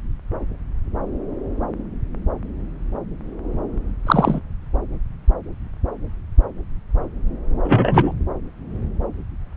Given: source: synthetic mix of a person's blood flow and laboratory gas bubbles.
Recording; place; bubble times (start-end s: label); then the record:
Doppler ultrasound of blood flow; subclavian vein
4.06-4.41 s: bubbles
7.63-8.12 s: bubbles
From the record:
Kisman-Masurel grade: 113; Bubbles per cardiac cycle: 1 to 2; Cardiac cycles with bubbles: 1 to 10%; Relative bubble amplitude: loud (0.450 to 0.775); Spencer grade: 1 (occasional bubble signal discernible with the cardiac motion signal, with majority of cardiac periods free of bubbles); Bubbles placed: anywhere in the cardiac cycle